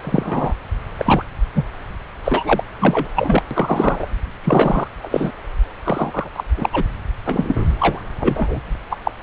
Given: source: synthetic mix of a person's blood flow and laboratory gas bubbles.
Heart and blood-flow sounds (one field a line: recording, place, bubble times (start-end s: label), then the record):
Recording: Doppler ultrasound of blood flow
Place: subclavian vein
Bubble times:
0.04-0.53 s: bubbles
0.98-1.24 s: bubbles
1.55-1.64 s: bubbles
2.24-2.62 s: bubbles
2.79-3.08 s: bubbles
3.16-3.42 s: bubbles
3.50-4.08 s: bubbles
4.44-4.88 s: bubbles
5.03-5.32 s: bubbles
5.85-6.29 s: bubbles
6.33-6.44 s: bubbles
6.57-6.70 s: bubbles
6.72-6.82 s: bubbles
7.25-7.66 s: bubbles
7.80-8.02 s: bubbles
8.19-8.74 s: bubbles
8.90-8.96 s: bubbles
9.04-9.12 s: bubbles
From the record:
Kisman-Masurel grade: 243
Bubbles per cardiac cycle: several, 3 to 8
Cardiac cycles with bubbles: 100%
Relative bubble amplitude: loud (0.450 to 0.775)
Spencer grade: 3 (all of the cardiac periods contain showers or single bubble signals, but not dominating or overriding the cardiac motion signals)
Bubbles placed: anywhere in the cardiac cycle